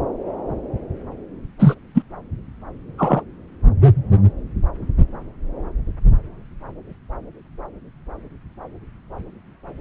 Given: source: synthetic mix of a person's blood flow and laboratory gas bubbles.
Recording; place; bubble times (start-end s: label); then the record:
Doppler ultrasound of blood flow; subclavian vein
1.59-1.74 s: bubbles
1.94-2.02 s: bubbles
2.98-3.21 s: bubbles
From the record:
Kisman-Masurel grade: 123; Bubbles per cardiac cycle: 1 to 2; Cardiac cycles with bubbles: 10 to 50%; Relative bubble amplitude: loud (0.450 to 0.775); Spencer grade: 2 (many but less than half of the cardiac periods contain bubble signals, singularly or in groups); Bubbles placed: anywhere in the cardiac cycle